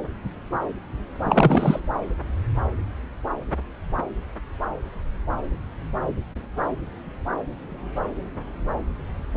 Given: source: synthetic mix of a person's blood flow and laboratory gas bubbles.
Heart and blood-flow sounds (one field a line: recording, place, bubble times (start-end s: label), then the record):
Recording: Doppler ultrasound of blood flow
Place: subclavian vein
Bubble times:
1.23-1.80 s: bubbles
From the record:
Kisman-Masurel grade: 213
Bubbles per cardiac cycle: several, 3 to 8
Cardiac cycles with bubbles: 1 to 10%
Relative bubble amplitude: loud (0.450 to 0.775)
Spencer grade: 1 (occasional bubble signal discernible with the cardiac motion signal, with majority of cardiac periods free of bubbles)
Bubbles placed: anywhere in the cardiac cycle